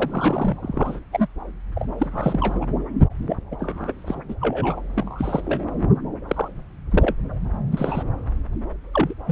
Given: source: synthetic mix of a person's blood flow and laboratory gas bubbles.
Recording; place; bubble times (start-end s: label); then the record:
Doppler ultrasound of blood flow; subclavian vein
0.00-0.58 s: bubbles
0.61-1.01 s: bubbles
1.12-1.27 s: bubbles
1.75-1.88 s: bubbles
1.98-2.65 s: bubbles
3.29-3.36 s: bubbles
3.51-3.93 s: bubbles
4.07-4.15 s: bubbles
4.28-4.35 s: bubbles
4.40-4.82 s: bubbles
4.95-5.65 s: bubbles
6.28-6.48 s: bubbles
6.90-7.16 s: bubbles
7.71-8.03 s: bubbles
8.93-9.13 s: bubbles
9.27-9.32 s: bubbles
From the record:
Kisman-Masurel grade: 242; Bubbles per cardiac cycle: several, 3 to 8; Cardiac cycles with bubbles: 100%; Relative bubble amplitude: moderate (0.250 to 0.450); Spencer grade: 3 (all of the cardiac periods contain showers or single bubble signals, but not dominating or overriding the cardiac motion signals); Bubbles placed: anywhere in the cardiac cycle